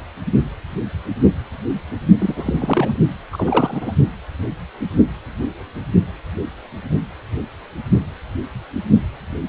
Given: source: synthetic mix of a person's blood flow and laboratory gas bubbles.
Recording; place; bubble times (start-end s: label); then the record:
Doppler ultrasound of blood flow; precordium
2.20-2.96 s: bubbles
3.32-3.93 s: bubbles
From the record:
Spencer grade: 2 (many but less than half of the cardiac periods contain bubble signals, singularly or in groups); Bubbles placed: only in the low amplitude regions of the cardiac cycle